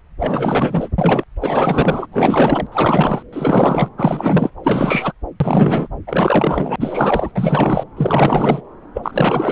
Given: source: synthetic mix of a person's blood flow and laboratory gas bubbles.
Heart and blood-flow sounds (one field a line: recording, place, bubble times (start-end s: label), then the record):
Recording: Doppler ultrasound of blood flow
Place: subclavian vein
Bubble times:
0.20-0.89 s: bubbles
0.98-1.24 s: bubbles
1.41-2.06 s: bubbles
2.11-2.67 s: bubbles
2.71-3.23 s: bubbles
3.33-3.88 s: bubbles
3.97-4.50 s: bubbles
4.63-5.12 s: bubbles
5.40-5.88 s: bubbles
6.07-6.76 s: bubbles
6.80-7.32 s: bubbles
7.35-7.83 s: bubbles
7.97-8.61 s: bubbles
8.94-9.52 s: bubbles
From the record:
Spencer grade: 4 (maximum detectable bubble signal sounding continuously throughout systole and diastole of every cardiac period, and overriding the amplitude of the normal cardiac signals)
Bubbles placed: anywhere in the cardiac cycle